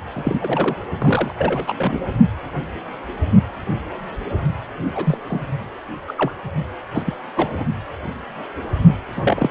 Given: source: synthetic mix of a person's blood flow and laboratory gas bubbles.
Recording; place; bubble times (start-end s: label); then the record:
Doppler ultrasound of blood flow; precordium
0.13-0.77 s: bubbles
1.00-1.34 s: bubbles
1.38-2.13 s: bubbles
4.95-5.17 s: bubbles
5.27-5.43 s: bubbles
6.08-6.14 s: bubbles
6.17-6.31 s: bubbles
6.93-7.02 s: bubbles
7.05-7.17 s: bubbles
7.36-7.64 s: bubbles
9.17-9.50 s: bubbles
From the record:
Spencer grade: 3 (all of the cardiac periods contain showers or single bubble signals, but not dominating or overriding the cardiac motion signals); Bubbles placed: only in the low amplitude regions of the cardiac cycle